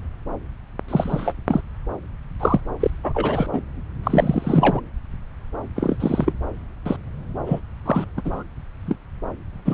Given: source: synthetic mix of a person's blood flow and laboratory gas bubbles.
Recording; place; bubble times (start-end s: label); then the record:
Doppler ultrasound of blood flow; subclavian vein
0.88-1.33 s: bubbles
1.47-1.61 s: bubbles
2.40-2.60 s: bubbles
2.79-2.90 s: bubbles
3.04-3.46 s: bubbles
3.52-3.61 s: bubbles
4.04-4.80 s: bubbles
5.76-5.97 s: bubbles
6.00-6.33 s: bubbles
6.86-6.96 s: bubbles
7.46-7.60 s: bubbles
7.86-8.04 s: bubbles
8.16-8.21 s: bubbles
8.24-8.43 s: bubbles
8.87-8.96 s: bubbles
9.65-9.74 s: bubbles
From the record:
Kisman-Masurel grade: 242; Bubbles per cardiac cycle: several, 3 to 8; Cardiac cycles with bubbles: 100%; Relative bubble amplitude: moderate (0.250 to 0.450); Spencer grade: 3 (all of the cardiac periods contain showers or single bubble signals, but not dominating or overriding the cardiac motion signals); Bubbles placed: anywhere in the cardiac cycle